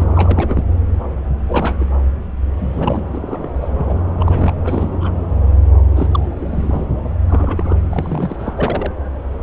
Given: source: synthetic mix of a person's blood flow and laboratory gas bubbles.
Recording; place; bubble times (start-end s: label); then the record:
Doppler ultrasound of blood flow; subclavian vein
0.00-0.06 s: bubbles
0.15-0.65 s: bubbles
1.48-1.77 s: bubbles
1.79-1.85 s: bubbles
2.56-3.04 s: bubbles
3.12-3.48 s: bubbles
3.60-3.68 s: bubbles
3.77-3.99 s: bubbles
4.20-4.54 s: bubbles
4.65-4.98 s: bubbles
5.00-5.11 s: bubbles
5.96-6.86 s: bubbles
7.29-7.76 s: bubbles
7.90-8.53 s: bubbles
8.56-8.92 s: bubbles
From the record:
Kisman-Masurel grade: 232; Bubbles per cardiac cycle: several, 3 to 8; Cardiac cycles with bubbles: 50 to 99%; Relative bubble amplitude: moderate (0.250 to 0.450); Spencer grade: 3 (all of the cardiac periods contain showers or single bubble signals, but not dominating or overriding the cardiac motion signals); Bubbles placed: anywhere in the cardiac cycle